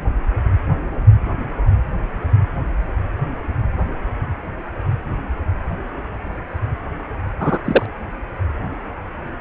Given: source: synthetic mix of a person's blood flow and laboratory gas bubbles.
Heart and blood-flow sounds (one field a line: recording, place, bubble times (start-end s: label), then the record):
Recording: Doppler ultrasound of blood flow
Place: precordium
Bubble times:
7.40-7.58 s: bubbles
7.64-7.86 s: bubbles
From the record:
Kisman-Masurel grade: 113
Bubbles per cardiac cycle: 1 to 2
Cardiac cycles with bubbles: 1 to 10%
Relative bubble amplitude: loud (0.450 to 0.775)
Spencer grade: 1 (occasional bubble signal discernible with the cardiac motion signal, with majority of cardiac periods free of bubbles)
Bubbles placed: anywhere in the cardiac cycle